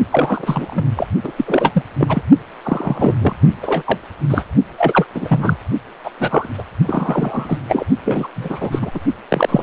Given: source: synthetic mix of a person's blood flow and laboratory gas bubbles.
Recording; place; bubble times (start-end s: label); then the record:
Doppler ultrasound of blood flow; precordium
0.12-0.85 s: bubbles
0.97-1.07 s: bubbles
1.24-1.32 s: bubbles
1.37-1.82 s: bubbles
1.97-2.22 s: bubbles
2.65-3.15 s: bubbles
3.19-3.33 s: bubbles
3.62-3.82 s: bubbles
3.85-3.98 s: bubbles
4.29-4.44 s: bubbles
4.78-5.05 s: bubbles
5.14-5.57 s: bubbles
6.04-6.11 s: bubbles
6.20-6.48 s: bubbles
6.58-6.63 s: bubbles
6.87-7.58 s: bubbles
7.68-7.85 s: bubbles
8.05-8.28 s: bubbles
8.36-8.91 s: bubbles
8.94-9.00 s: bubbles
9.29-9.63 s: bubbles
From the record:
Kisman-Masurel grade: 343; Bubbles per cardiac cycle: rolling drumbeat, 9 or more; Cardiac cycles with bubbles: 100%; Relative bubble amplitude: loud (0.450 to 0.775); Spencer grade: 3 (all of the cardiac periods contain showers or single bubble signals, but not dominating or overriding the cardiac motion signals); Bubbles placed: only in the low amplitude regions of the cardiac cycle